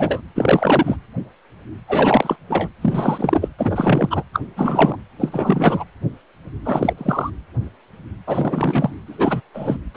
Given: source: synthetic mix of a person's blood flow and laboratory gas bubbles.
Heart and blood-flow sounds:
Doppler ultrasound of blood flow; precordium
0.00-0.20 s: bubbles
0.35-0.96 s: bubbles
1.88-2.36 s: bubbles
2.50-2.69 s: bubbles
2.81-3.49 s: bubbles
3.59-4.23 s: bubbles
4.33-4.40 s: bubbles
4.57-4.96 s: bubbles
5.20-5.84 s: bubbles
6.65-6.93 s: bubbles
6.97-7.30 s: bubbles
8.27-8.95 s: bubbles
9.08-9.41 s: bubbles
9.54-9.77 s: bubbles
9.94-9.97 s: bubbles
From the record:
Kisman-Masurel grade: 333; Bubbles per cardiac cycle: rolling drumbeat, 9 or more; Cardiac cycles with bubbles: 50 to 99%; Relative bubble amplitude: loud (0.450 to 0.775); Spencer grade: 3 (all of the cardiac periods contain showers or single bubble signals, but not dominating or overriding the cardiac motion signals); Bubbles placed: anywhere in the cardiac cycle

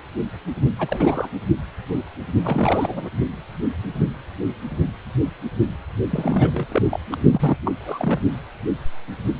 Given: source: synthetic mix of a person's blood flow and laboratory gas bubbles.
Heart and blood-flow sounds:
Doppler ultrasound of blood flow; precordium
0.79-1.29 s: bubbles
2.44-3.09 s: bubbles
6.09-6.83 s: bubbles
6.91-7.00 s: bubbles
7.11-7.17 s: bubbles
7.31-7.57 s: bubbles
7.64-7.72 s: bubbles
7.85-8.20 s: bubbles
From the record:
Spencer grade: 3 (all of the cardiac periods contain showers or single bubble signals, but not dominating or overriding the cardiac motion signals); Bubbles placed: only in the low amplitude regions of the cardiac cycle

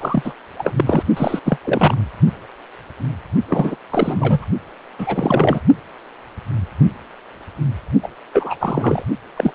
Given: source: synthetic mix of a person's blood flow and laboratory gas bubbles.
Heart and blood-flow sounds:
Doppler ultrasound of blood flow; precordium
0.01-0.33 s: bubbles
0.58-0.74 s: bubbles
0.76-1.03 s: bubbles
1.17-1.40 s: bubbles
1.45-1.58 s: bubbles
1.64-1.97 s: bubbles
3.48-3.76 s: bubbles
3.90-4.46 s: bubbles
4.98-5.61 s: bubbles
8.03-8.08 s: bubbles
8.33-8.56 s: bubbles
8.60-9.03 s: bubbles
9.36-9.55 s: bubbles
From the record:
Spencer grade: 3 (all of the cardiac periods contain showers or single bubble signals, but not dominating or overriding the cardiac motion signals); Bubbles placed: only in the low amplitude regions of the cardiac cycle

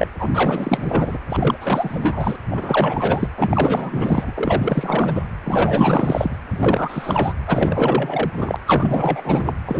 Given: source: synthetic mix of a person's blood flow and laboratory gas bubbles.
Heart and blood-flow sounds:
Doppler ultrasound of blood flow; precordium
0.00-0.08 s: bubbles
0.19-0.30 s: bubbles
0.33-1.17 s: bubbles
1.28-1.57 s: bubbles
1.60-2.38 s: bubbles
2.51-3.28 s: bubbles
3.37-5.24 s: bubbles
5.44-6.37 s: bubbles
6.53-7.33 s: bubbles
7.46-8.30 s: bubbles
8.34-8.56 s: bubbles
8.66-9.54 s: bubbles
9.65-9.80 s: bubbles
From the record:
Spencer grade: 4 (maximum detectable bubble signal sounding continuously throughout systole and diastole of every cardiac period, and overriding the amplitude of the normal cardiac signals); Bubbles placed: anywhere in the cardiac cycle

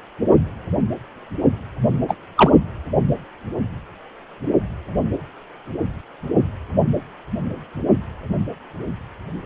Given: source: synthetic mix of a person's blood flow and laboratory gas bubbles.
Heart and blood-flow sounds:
Doppler ultrasound of blood flow; precordium
2.08-2.15 s: bubbles
2.37-2.51 s: bubbles
From the record:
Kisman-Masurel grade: 113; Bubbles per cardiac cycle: 1 to 2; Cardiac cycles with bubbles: 1 to 10%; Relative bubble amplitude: loud (0.450 to 0.775); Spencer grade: 1 (occasional bubble signal discernible with the cardiac motion signal, with majority of cardiac periods free of bubbles); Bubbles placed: anywhere in the cardiac cycle

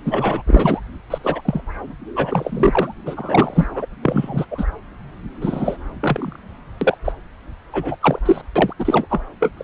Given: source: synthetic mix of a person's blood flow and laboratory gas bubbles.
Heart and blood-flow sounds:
Doppler ultrasound of blood flow; subclavian vein
0.05-0.42 s: bubbles
0.46-0.80 s: bubbles
1.10-1.18 s: bubbles
1.24-1.42 s: bubbles
1.45-1.61 s: bubbles
2.15-2.95 s: bubbles
3.06-3.67 s: bubbles
3.73-3.85 s: bubbles
4.02-4.45 s: bubbles
4.50-4.65 s: bubbles
5.41-5.76 s: bubbles
6.00-6.39 s: bubbles
6.81-6.97 s: bubbles
7.04-7.12 s: bubbles
7.72-7.96 s: bubbles
8.00-8.20 s: bubbles
8.25-8.41 s: bubbles
8.55-8.73 s: bubbles
8.79-9.06 s: bubbles
9.10-9.21 s: bubbles
9.40-9.50 s: bubbles
9.57-9.64 s: bubbles
From the record:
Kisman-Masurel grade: 243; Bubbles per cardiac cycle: several, 3 to 8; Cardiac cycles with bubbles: 100%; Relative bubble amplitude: loud (0.450 to 0.775); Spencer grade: 3 (all of the cardiac periods contain showers or single bubble signals, but not dominating or overriding the cardiac motion signals); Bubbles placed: anywhere in the cardiac cycle

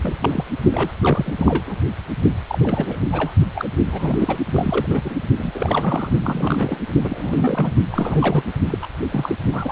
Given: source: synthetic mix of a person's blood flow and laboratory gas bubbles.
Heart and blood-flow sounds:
Doppler ultrasound of blood flow; precordium
0.03-0.18 s: bubbles
0.22-0.43 s: bubbles
0.72-0.92 s: bubbles
1.02-1.33 s: bubbles
1.38-1.63 s: bubbles
1.66-1.81 s: bubbles
2.47-2.58 s: bubbles
2.63-2.98 s: bubbles
3.12-3.32 s: bubbles
3.54-3.69 s: bubbles
3.87-4.40 s: bubbles
4.54-5.01 s: bubbles
5.04-5.15 s: bubbles
5.38-6.12 s: bubbles
6.21-6.79 s: bubbles
7.03-7.73 s: bubbles
7.90-8.43 s: bubbles
8.70-8.78 s: bubbles
8.81-8.87 s: bubbles
9.11-9.36 s: bubbles
9.52-9.72 s: bubbles
From the record:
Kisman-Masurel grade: 342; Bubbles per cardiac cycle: rolling drumbeat, 9 or more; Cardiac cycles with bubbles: 100%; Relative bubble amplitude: moderate (0.250 to 0.450); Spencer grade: 3 (all of the cardiac periods contain showers or single bubble signals, but not dominating or overriding the cardiac motion signals); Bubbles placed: only in the low amplitude regions of the cardiac cycle

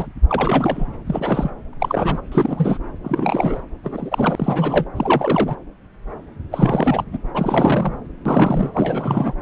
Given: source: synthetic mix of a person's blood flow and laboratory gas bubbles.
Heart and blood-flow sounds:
Doppler ultrasound of blood flow; subclavian vein
0.00-0.08 s: bubbles
0.28-0.85 s: bubbles
1.06-1.50 s: bubbles
1.80-2.21 s: bubbles
2.31-2.78 s: bubbles
3.03-3.61 s: bubbles
3.83-4.84 s: bubbles
4.95-5.55 s: bubbles
6.51-7.04 s: bubbles
7.12-7.18 s: bubbles
7.34-7.95 s: bubbles
8.25-8.70 s: bubbles
8.74-9.34 s: bubbles
From the record:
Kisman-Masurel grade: 332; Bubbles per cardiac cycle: rolling drumbeat, 9 or more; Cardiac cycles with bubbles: 50 to 99%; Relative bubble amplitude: moderate (0.250 to 0.450); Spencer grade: 3 (all of the cardiac periods contain showers or single bubble signals, but not dominating or overriding the cardiac motion signals); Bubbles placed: anywhere in the cardiac cycle

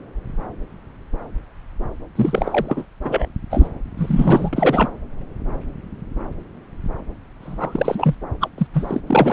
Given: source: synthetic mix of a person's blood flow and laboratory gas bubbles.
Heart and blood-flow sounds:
Doppler ultrasound of blood flow; subclavian vein
2.15-2.85 s: bubbles
3.04-3.27 s: bubbles
3.50-3.68 s: bubbles
3.98-4.90 s: bubbles
7.41-8.15 s: bubbles
8.40-8.49 s: bubbles
8.57-8.67 s: bubbles
8.73-9.01 s: bubbles
9.06-9.33 s: bubbles
From the record:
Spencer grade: 3 (all of the cardiac periods contain showers or single bubble signals, but not dominating or overriding the cardiac motion signals); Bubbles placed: anywhere in the cardiac cycle

